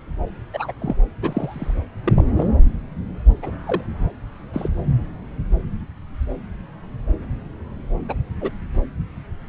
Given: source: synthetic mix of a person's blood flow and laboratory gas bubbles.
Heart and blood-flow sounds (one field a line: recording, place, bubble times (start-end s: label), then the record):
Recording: Doppler ultrasound of blood flow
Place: subclavian vein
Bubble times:
0.53-0.72 s: bubbles
0.80-0.96 s: bubbles
1.22-1.74 s: bubbles
2.04-2.25 s: bubbles
2.36-2.47 s: bubbles
3.42-3.51 s: bubbles
3.66-3.81 s: bubbles
4.53-4.68 s: bubbles
8.08-8.14 s: bubbles
8.41-8.51 s: bubbles
From the record:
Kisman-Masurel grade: 122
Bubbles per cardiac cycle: 1 to 2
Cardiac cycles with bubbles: 10 to 50%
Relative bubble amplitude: moderate (0.250 to 0.450)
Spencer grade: 2 (many but less than half of the cardiac periods contain bubble signals, singularly or in groups)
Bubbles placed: anywhere in the cardiac cycle